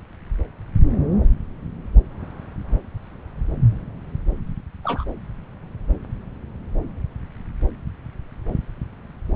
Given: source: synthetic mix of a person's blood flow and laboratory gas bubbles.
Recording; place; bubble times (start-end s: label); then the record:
Doppler ultrasound of blood flow; subclavian vein
4.84-5.04 s: bubbles
From the record:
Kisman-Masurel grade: 111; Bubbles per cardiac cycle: 1 to 2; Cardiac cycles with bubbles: 1 to 10%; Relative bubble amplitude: barely perceptible (0.100 to 0.250); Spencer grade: 1 (occasional bubble signal discernible with the cardiac motion signal, with majority of cardiac periods free of bubbles); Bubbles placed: anywhere in the cardiac cycle